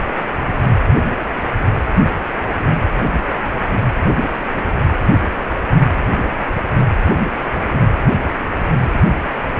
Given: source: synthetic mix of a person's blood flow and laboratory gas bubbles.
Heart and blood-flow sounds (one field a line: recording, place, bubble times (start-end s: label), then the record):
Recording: Doppler ultrasound of blood flow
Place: precordium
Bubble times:
no bubbles
From the record:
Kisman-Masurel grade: 000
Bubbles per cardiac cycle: 0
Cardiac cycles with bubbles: 0%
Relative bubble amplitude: no bubbles discernible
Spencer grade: 0 (complete lack of bubble signals)